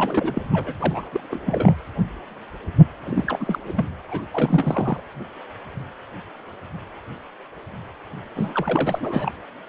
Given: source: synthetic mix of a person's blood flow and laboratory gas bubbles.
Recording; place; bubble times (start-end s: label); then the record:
Doppler ultrasound of blood flow; precordium
0.00-0.46 s: bubbles
0.52-0.75 s: bubbles
0.78-1.06 s: bubbles
1.12-1.20 s: bubbles
1.30-1.76 s: bubbles
3.04-3.58 s: bubbles
3.66-3.73 s: bubbles
3.75-3.86 s: bubbles
4.08-4.28 s: bubbles
4.32-5.00 s: bubbles
8.35-9.32 s: bubbles
From the record:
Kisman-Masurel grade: 332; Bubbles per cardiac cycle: rolling drumbeat, 9 or more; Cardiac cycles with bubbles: 50 to 99%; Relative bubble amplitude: moderate (0.250 to 0.450); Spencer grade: 3 (all of the cardiac periods contain showers or single bubble signals, but not dominating or overriding the cardiac motion signals); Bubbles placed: anywhere in the cardiac cycle